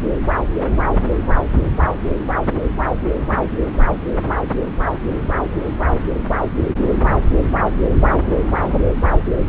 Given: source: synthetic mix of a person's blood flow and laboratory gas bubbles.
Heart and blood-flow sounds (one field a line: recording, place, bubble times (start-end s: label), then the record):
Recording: Doppler ultrasound of blood flow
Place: subclavian vein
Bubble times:
no bubbles
From the record:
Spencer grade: 0 (complete lack of bubble signals)